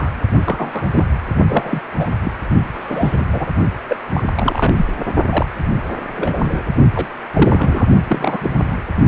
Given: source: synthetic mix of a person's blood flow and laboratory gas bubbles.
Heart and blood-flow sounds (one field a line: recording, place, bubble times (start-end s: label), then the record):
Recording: Doppler ultrasound of blood flow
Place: precordium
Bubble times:
0.00-0.10 s: bubbles
0.46-0.87 s: bubbles
0.94-1.04 s: bubbles
1.49-1.80 s: bubbles
1.95-2.07 s: bubbles
2.23-2.32 s: bubbles
2.72-3.25 s: bubbles
3.32-3.46 s: bubbles
3.88-3.96 s: bubbles
4.13-4.23 s: bubbles
4.34-4.73 s: bubbles
4.76-4.85 s: bubbles
5.29-5.46 s: bubbles
6.16-6.62 s: bubbles
6.95-7.07 s: bubbles
7.33-7.87 s: bubbles
8.08-8.77 s: bubbles
From the record:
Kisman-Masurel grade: 242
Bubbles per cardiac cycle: several, 3 to 8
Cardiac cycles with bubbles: 100%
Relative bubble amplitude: moderate (0.250 to 0.450)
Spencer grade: 3 (all of the cardiac periods contain showers or single bubble signals, but not dominating or overriding the cardiac motion signals)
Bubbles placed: only in the low amplitude regions of the cardiac cycle